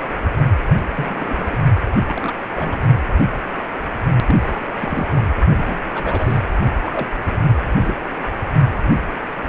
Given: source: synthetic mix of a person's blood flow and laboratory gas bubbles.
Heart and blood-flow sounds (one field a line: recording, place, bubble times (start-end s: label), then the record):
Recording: Doppler ultrasound of blood flow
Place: precordium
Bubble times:
0.03-0.09 s: bubbles
0.13-0.18 s: bubbles
0.97-1.58 s: bubbles
1.92-1.97 s: bubbles
2.02-2.33 s: bubbles
2.54-2.81 s: bubbles
4.26-4.35 s: bubbles
4.40-4.60 s: bubbles
4.69-4.76 s: bubbles
4.80-5.23 s: bubbles
5.56-5.79 s: bubbles
5.94-6.42 s: bubbles
6.85-7.06 s: bubbles
7.25-7.38 s: bubbles
7.67-7.94 s: bubbles
From the record:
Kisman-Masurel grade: 232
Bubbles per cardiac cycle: several, 3 to 8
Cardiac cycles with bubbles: 50 to 99%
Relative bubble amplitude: moderate (0.250 to 0.450)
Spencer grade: 3 (all of the cardiac periods contain showers or single bubble signals, but not dominating or overriding the cardiac motion signals)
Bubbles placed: only in the low amplitude regions of the cardiac cycle